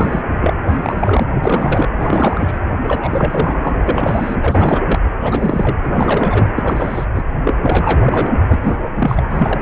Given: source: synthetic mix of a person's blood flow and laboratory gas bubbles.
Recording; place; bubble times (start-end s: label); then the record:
Doppler ultrasound of blood flow; precordium
0.00-0.22 s: bubbles
0.42-0.54 s: bubbles
0.68-1.24 s: bubbles
1.31-1.93 s: bubbles
1.97-2.59 s: bubbles
2.83-3.83 s: bubbles
3.88-4.37 s: bubbles
4.41-4.83 s: bubbles
4.88-5.00 s: bubbles
5.20-5.77 s: bubbles
5.84-5.90 s: bubbles
5.95-6.48 s: bubbles
6.56-7.06 s: bubbles
7.14-7.24 s: bubbles
7.44-7.54 s: bubbles
7.62-8.33 s: bubbles
8.47-8.79 s: bubbles
8.96-9.62 s: bubbles
From the record:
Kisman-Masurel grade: 343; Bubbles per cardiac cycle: rolling drumbeat, 9 or more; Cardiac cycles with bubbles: 100%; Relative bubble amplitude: loud (0.450 to 0.775); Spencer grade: 3 (all of the cardiac periods contain showers or single bubble signals, but not dominating or overriding the cardiac motion signals); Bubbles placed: anywhere in the cardiac cycle